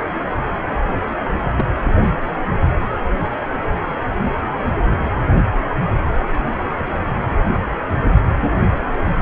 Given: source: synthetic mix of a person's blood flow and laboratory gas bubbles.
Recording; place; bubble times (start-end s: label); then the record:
Doppler ultrasound of blood flow; precordium
1.57-1.66 s: bubbles
From the record:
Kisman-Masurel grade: 111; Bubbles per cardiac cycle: 1 to 2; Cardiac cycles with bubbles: 1 to 10%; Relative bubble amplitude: barely perceptible (0.100 to 0.250); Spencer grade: 1 (occasional bubble signal discernible with the cardiac motion signal, with majority of cardiac periods free of bubbles); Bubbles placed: anywhere in the cardiac cycle